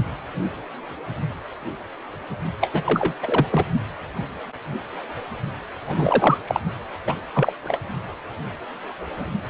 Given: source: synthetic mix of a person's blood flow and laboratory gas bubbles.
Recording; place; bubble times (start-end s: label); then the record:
Doppler ultrasound of blood flow; precordium
2.61-3.14 s: bubbles
3.22-3.46 s: bubbles
3.51-3.66 s: bubbles
5.87-6.38 s: bubbles
6.47-6.60 s: bubbles
7.06-7.14 s: bubbles
7.34-7.52 s: bubbles
7.63-7.79 s: bubbles
From the record:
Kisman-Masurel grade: 222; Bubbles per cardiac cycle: several, 3 to 8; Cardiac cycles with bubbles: 10 to 50%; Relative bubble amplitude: moderate (0.250 to 0.450); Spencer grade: 2 (many but less than half of the cardiac periods contain bubble signals, singularly or in groups); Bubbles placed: only in the low amplitude regions of the cardiac cycle